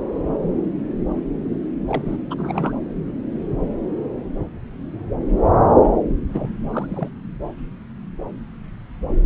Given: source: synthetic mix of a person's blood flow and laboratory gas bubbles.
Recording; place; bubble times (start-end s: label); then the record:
Doppler ultrasound of blood flow; subclavian vein
1.87-2.02 s: bubbles
2.06-2.17 s: bubbles
2.31-2.36 s: bubbles
2.39-2.73 s: bubbles
6.28-6.50 s: bubbles
6.70-7.09 s: bubbles
From the record:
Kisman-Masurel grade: 221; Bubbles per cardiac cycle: several, 3 to 8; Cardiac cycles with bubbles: 10 to 50%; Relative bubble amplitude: barely perceptible (0.100 to 0.250); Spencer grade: 2 (many but less than half of the cardiac periods contain bubble signals, singularly or in groups); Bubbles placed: anywhere in the cardiac cycle